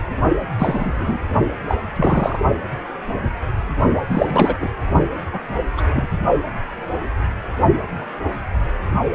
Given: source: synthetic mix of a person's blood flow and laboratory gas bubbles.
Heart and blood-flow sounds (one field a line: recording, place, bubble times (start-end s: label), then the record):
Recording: Doppler ultrasound of blood flow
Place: precordium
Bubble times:
0.58-1.20 s: bubbles
1.68-1.76 s: bubbles
1.95-2.40 s: bubbles
4.08-4.56 s: bubbles
4.60-4.70 s: bubbles
5.33-5.40 s: bubbles
5.77-5.82 s: bubbles
5.92-6.08 s: bubbles
From the record:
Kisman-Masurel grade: 222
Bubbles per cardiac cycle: several, 3 to 8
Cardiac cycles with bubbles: 10 to 50%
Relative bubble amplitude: moderate (0.250 to 0.450)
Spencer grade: 2 (many but less than half of the cardiac periods contain bubble signals, singularly or in groups)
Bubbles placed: only in the low amplitude regions of the cardiac cycle